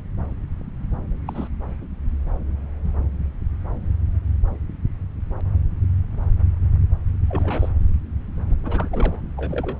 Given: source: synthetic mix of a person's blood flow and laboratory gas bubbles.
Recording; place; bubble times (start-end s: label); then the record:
Doppler ultrasound of blood flow; subclavian vein
1.26-1.48 s: bubbles
7.28-7.69 s: bubbles
8.50-8.54 s: bubbles
8.63-8.88 s: bubbles
8.91-9.20 s: bubbles
9.37-9.78 s: bubbles
From the record:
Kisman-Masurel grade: 221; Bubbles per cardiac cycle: several, 3 to 8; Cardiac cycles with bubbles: 10 to 50%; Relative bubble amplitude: barely perceptible (0.100 to 0.250); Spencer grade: 2 (many but less than half of the cardiac periods contain bubble signals, singularly or in groups); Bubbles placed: anywhere in the cardiac cycle